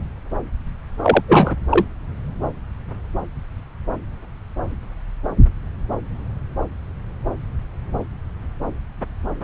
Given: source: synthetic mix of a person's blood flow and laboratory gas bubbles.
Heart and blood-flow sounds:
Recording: Doppler ultrasound of blood flow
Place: subclavian vein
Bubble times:
1.03-1.22 s: bubbles
1.28-1.55 s: bubbles
1.70-1.85 s: bubbles
From the record:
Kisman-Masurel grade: 223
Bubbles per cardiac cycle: several, 3 to 8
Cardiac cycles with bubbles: 10 to 50%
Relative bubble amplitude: loud (0.450 to 0.775)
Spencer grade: 2 (many but less than half of the cardiac periods contain bubble signals, singularly or in groups)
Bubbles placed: anywhere in the cardiac cycle

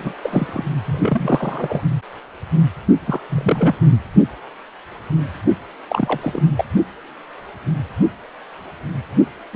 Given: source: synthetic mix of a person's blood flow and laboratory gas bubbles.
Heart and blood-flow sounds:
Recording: Doppler ultrasound of blood flow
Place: precordium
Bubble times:
0.00-0.14 s: bubbles
0.23-0.65 s: bubbles
0.85-1.82 s: bubbles
3.07-3.20 s: bubbles
3.29-3.75 s: bubbles
5.88-6.40 s: bubbles
6.56-6.65 s: bubbles
9.53-9.56 s: bubbles
From the record:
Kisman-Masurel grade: 232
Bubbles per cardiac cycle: several, 3 to 8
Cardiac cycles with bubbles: 50 to 99%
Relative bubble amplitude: moderate (0.250 to 0.450)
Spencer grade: 3 (all of the cardiac periods contain showers or single bubble signals, but not dominating or overriding the cardiac motion signals)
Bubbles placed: only in the low amplitude regions of the cardiac cycle

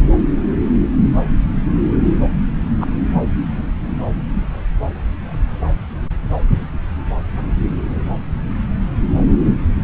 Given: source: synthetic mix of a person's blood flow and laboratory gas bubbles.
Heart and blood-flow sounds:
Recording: Doppler ultrasound of blood flow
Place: subclavian vein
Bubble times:
2.80-2.87 s: bubbles
From the record:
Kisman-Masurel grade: 112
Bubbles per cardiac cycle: 1 to 2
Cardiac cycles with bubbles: 1 to 10%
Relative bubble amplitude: moderate (0.250 to 0.450)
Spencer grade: 1 (occasional bubble signal discernible with the cardiac motion signal, with majority of cardiac periods free of bubbles)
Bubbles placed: anywhere in the cardiac cycle

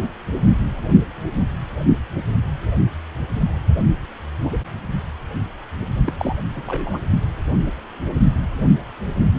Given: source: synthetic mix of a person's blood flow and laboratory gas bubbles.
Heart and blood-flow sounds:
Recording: Doppler ultrasound of blood flow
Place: precordium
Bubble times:
6.06-6.12 s: bubbles
6.19-6.36 s: bubbles
6.55-7.01 s: bubbles
From the record:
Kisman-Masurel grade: 222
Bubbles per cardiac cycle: several, 3 to 8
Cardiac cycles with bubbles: 10 to 50%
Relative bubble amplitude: moderate (0.250 to 0.450)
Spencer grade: 2 (many but less than half of the cardiac periods contain bubble signals, singularly or in groups)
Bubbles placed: only in the low amplitude regions of the cardiac cycle

